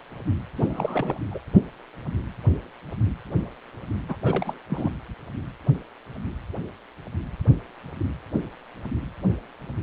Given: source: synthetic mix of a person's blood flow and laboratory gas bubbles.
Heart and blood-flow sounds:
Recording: Doppler ultrasound of blood flow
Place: precordium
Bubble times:
0.56-1.18 s: bubbles
1.31-1.40 s: bubbles
4.08-4.16 s: bubbles
4.23-4.58 s: bubbles
4.70-4.90 s: bubbles
From the record:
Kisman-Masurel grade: 221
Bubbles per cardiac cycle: several, 3 to 8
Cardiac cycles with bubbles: 10 to 50%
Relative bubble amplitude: barely perceptible (0.100 to 0.250)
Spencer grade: 2 (many but less than half of the cardiac periods contain bubble signals, singularly or in groups)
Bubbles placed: anywhere in the cardiac cycle

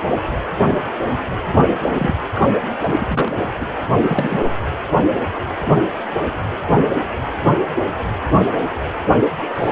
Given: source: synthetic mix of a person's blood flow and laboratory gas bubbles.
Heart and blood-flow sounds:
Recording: Doppler ultrasound of blood flow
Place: precordium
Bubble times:
1.98-2.15 s: bubbles
2.33-2.48 s: bubbles
2.82-3.36 s: bubbles
3.60-3.65 s: bubbles
3.99-4.50 s: bubbles
9.54-9.72 s: bubbles
From the record:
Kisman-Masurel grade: 222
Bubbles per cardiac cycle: several, 3 to 8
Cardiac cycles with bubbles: 10 to 50%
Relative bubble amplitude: moderate (0.250 to 0.450)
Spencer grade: 2 (many but less than half of the cardiac periods contain bubble signals, singularly or in groups)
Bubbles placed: anywhere in the cardiac cycle

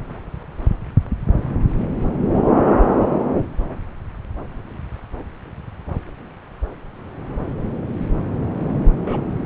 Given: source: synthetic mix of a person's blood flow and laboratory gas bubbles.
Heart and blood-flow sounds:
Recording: Doppler ultrasound of blood flow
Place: subclavian vein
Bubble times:
3.68-3.76 s: bubbles
9.02-9.21 s: bubbles
From the record:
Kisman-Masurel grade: 121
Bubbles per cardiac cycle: 1 to 2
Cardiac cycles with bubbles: 10 to 50%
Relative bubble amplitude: barely perceptible (0.100 to 0.250)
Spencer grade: 2 (many but less than half of the cardiac periods contain bubble signals, singularly or in groups)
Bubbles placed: anywhere in the cardiac cycle

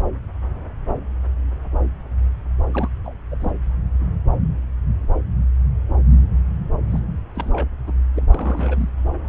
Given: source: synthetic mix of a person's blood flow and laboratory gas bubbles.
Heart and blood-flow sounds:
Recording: Doppler ultrasound of blood flow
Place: subclavian vein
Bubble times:
2.73-2.89 s: bubbles
3.04-3.15 s: bubbles
3.31-3.37 s: bubbles
3.40-3.52 s: bubbles
6.90-7.00 s: bubbles
7.35-7.67 s: bubbles
7.86-7.92 s: bubbles
8.14-8.23 s: bubbles
8.30-8.89 s: bubbles
From the record:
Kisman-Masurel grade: 221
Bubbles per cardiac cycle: several, 3 to 8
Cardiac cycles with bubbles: 10 to 50%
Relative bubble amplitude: barely perceptible (0.100 to 0.250)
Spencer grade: 2 (many but less than half of the cardiac periods contain bubble signals, singularly or in groups)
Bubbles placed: anywhere in the cardiac cycle

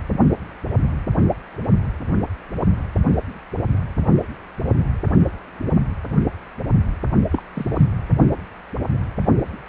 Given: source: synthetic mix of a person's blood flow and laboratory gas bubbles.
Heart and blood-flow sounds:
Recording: Doppler ultrasound of blood flow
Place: precordium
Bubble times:
7.32-7.42 s: bubbles
7.54-7.86 s: bubbles
From the record:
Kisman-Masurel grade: 111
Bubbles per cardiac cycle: 1 to 2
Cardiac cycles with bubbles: 1 to 10%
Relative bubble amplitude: barely perceptible (0.100 to 0.250)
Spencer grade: 1 (occasional bubble signal discernible with the cardiac motion signal, with majority of cardiac periods free of bubbles)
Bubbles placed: only in the low amplitude regions of the cardiac cycle

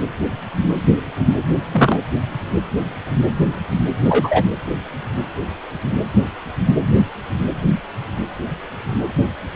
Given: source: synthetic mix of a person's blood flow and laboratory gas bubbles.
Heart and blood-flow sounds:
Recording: Doppler ultrasound of blood flow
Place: precordium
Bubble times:
1.72-2.00 s: bubbles
4.04-4.46 s: bubbles
From the record:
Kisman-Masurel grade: 113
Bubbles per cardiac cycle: 1 to 2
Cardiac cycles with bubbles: 1 to 10%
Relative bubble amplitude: loud (0.450 to 0.775)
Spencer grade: 1 (occasional bubble signal discernible with the cardiac motion signal, with majority of cardiac periods free of bubbles)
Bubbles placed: anywhere in the cardiac cycle

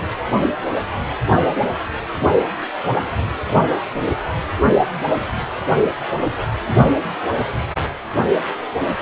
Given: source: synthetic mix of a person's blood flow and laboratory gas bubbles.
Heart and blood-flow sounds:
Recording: Doppler ultrasound of blood flow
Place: precordium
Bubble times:
3.00-3.10 s: bubbles
From the record:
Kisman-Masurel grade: 111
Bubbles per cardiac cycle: 1 to 2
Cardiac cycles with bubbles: 1 to 10%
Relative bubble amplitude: barely perceptible (0.100 to 0.250)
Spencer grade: 1 (occasional bubble signal discernible with the cardiac motion signal, with majority of cardiac periods free of bubbles)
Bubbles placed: only in the low amplitude regions of the cardiac cycle

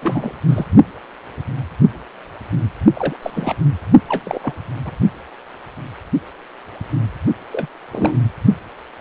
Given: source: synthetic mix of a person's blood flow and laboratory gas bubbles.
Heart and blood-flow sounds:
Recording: Doppler ultrasound of blood flow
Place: precordium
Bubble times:
0.02-0.32 s: bubbles
0.48-0.65 s: bubbles
2.95-3.17 s: bubbles
3.22-3.54 s: bubbles
4.08-4.54 s: bubbles
4.85-4.91 s: bubbles
7.52-7.67 s: bubbles
7.92-8.17 s: bubbles
From the record:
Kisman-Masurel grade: 222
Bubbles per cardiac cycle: several, 3 to 8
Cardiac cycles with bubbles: 10 to 50%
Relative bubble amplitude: moderate (0.250 to 0.450)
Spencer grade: 2 (many but less than half of the cardiac periods contain bubble signals, singularly or in groups)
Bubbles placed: only in the low amplitude regions of the cardiac cycle

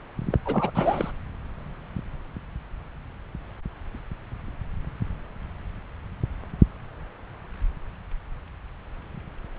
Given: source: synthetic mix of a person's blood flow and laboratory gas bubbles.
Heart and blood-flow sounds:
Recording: Doppler ultrasound of blood flow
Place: subclavian vein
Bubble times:
0.31-0.38 s: bubbles
0.44-0.71 s: bubbles
0.75-1.11 s: bubbles
From the record:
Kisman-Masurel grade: 212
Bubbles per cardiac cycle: several, 3 to 8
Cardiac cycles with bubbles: 1 to 10%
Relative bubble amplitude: moderate (0.250 to 0.450)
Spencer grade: 1 (occasional bubble signal discernible with the cardiac motion signal, with majority of cardiac periods free of bubbles)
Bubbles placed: anywhere in the cardiac cycle

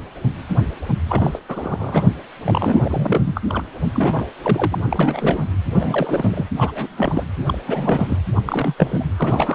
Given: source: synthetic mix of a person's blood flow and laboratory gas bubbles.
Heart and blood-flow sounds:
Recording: Doppler ultrasound of blood flow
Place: precordium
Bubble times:
1.08-1.39 s: bubbles
1.48-2.04 s: bubbles
2.42-3.41 s: bubbles
3.49-3.63 s: bubbles
3.94-4.27 s: bubbles
4.42-4.77 s: bubbles
4.88-5.45 s: bubbles
5.70-6.44 s: bubbles
6.57-6.71 s: bubbles
6.74-7.25 s: bubbles
7.47-7.58 s: bubbles
7.67-8.19 s: bubbles
8.35-8.41 s: bubbles
8.46-8.74 s: bubbles
8.78-9.11 s: bubbles
9.16-9.55 s: bubbles
From the record:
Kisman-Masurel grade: 332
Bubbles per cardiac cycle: rolling drumbeat, 9 or more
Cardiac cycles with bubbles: 50 to 99%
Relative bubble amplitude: moderate (0.250 to 0.450)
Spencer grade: 3 (all of the cardiac periods contain showers or single bubble signals, but not dominating or overriding the cardiac motion signals)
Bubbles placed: anywhere in the cardiac cycle

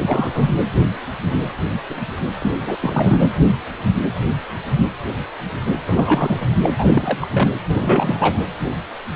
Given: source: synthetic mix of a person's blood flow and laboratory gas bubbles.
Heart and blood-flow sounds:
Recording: Doppler ultrasound of blood flow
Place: precordium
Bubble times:
0.00-0.53 s: bubbles
2.40-2.51 s: bubbles
2.65-2.77 s: bubbles
2.81-3.31 s: bubbles
5.87-6.49 s: bubbles
6.62-6.72 s: bubbles
6.75-7.19 s: bubbles
7.21-7.28 s: bubbles
7.33-7.50 s: bubbles
7.66-8.43 s: bubbles
From the record:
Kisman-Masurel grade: 332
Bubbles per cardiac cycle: rolling drumbeat, 9 or more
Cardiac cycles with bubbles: 50 to 99%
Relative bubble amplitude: moderate (0.250 to 0.450)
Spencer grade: 3 (all of the cardiac periods contain showers or single bubble signals, but not dominating or overriding the cardiac motion signals)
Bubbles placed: anywhere in the cardiac cycle

